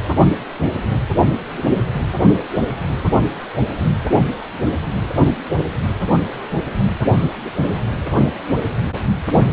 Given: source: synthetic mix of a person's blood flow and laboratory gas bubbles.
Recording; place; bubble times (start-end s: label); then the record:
Doppler ultrasound of blood flow; precordium
no bubbles
From the record:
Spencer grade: 0 (complete lack of bubble signals)